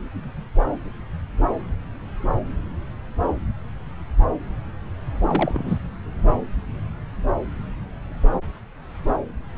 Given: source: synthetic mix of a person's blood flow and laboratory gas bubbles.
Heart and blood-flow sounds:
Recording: Doppler ultrasound of blood flow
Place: subclavian vein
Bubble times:
5.27-5.78 s: bubbles
From the record:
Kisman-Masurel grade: 211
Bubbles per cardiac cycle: several, 3 to 8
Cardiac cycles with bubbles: 1 to 10%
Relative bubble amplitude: barely perceptible (0.100 to 0.250)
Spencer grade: 1 (occasional bubble signal discernible with the cardiac motion signal, with majority of cardiac periods free of bubbles)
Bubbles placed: anywhere in the cardiac cycle

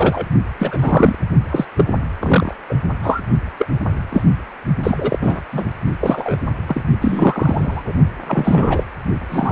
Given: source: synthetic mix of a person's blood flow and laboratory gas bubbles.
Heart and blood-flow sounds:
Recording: Doppler ultrasound of blood flow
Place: precordium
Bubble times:
0.00-0.26 s: bubbles
0.59-1.15 s: bubbles
1.51-1.65 s: bubbles
1.76-1.84 s: bubbles
2.19-2.54 s: bubbles
2.68-2.75 s: bubbles
3.02-3.21 s: bubbles
3.59-3.67 s: bubbles
4.09-4.22 s: bubbles
4.83-5.18 s: bubbles
5.21-5.40 s: bubbles
5.52-5.64 s: bubbles
6.00-6.36 s: bubbles
6.67-6.81 s: bubbles
7.01-7.83 s: bubbles
7.87-7.92 s: bubbles
8.27-8.85 s: bubbles
9.31-9.51 s: bubbles
From the record:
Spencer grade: 3 (all of the cardiac periods contain showers or single bubble signals, but not dominating or overriding the cardiac motion signals)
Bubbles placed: only in the low amplitude regions of the cardiac cycle

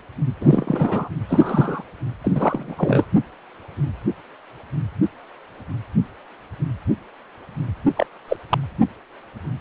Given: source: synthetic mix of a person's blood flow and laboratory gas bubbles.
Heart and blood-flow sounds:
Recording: Doppler ultrasound of blood flow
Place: precordium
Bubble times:
0.41-1.09 s: bubbles
1.28-1.82 s: bubbles
2.23-3.06 s: bubbles
7.96-8.06 s: bubbles
8.28-8.37 s: bubbles
8.50-8.58 s: bubbles
From the record:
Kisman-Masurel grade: 223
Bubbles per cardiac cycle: several, 3 to 8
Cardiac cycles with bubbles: 10 to 50%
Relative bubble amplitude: loud (0.450 to 0.775)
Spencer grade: 2 (many but less than half of the cardiac periods contain bubble signals, singularly or in groups)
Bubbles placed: anywhere in the cardiac cycle

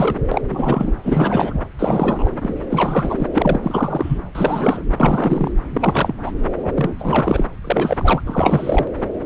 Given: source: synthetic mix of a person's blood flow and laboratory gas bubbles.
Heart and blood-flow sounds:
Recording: Doppler ultrasound of blood flow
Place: subclavian vein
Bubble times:
0.00-0.19 s: bubbles
0.32-0.42 s: bubbles
0.48-0.93 s: bubbles
1.03-1.61 s: bubbles
1.79-2.29 s: bubbles
2.42-2.55 s: bubbles
2.70-3.28 s: bubbles
3.33-3.59 s: bubbles
3.62-4.19 s: bubbles
4.34-4.83 s: bubbles
5.00-5.51 s: bubbles
5.74-6.15 s: bubbles
6.24-6.32 s: bubbles
6.62-7.45 s: bubbles
7.64-8.21 s: bubbles
8.26-8.88 s: bubbles
From the record:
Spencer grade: 3 (all of the cardiac periods contain showers or single bubble signals, but not dominating or overriding the cardiac motion signals)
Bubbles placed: anywhere in the cardiac cycle

